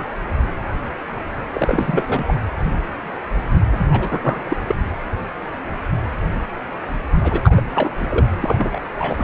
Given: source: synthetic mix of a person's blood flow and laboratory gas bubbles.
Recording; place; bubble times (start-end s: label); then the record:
Doppler ultrasound of blood flow; precordium
0.00-0.04 s: bubbles
1.53-2.24 s: bubbles
2.27-2.34 s: bubbles
3.71-3.87 s: bubbles
3.92-4.62 s: bubbles
4.67-4.75 s: bubbles
7.22-7.61 s: bubbles
7.74-8.27 s: bubbles
8.41-8.79 s: bubbles
8.98-9.24 s: bubbles
From the record:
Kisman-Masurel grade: 332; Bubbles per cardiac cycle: rolling drumbeat, 9 or more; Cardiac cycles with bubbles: 50 to 99%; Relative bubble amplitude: moderate (0.250 to 0.450); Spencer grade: 3 (all of the cardiac periods contain showers or single bubble signals, but not dominating or overriding the cardiac motion signals); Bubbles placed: anywhere in the cardiac cycle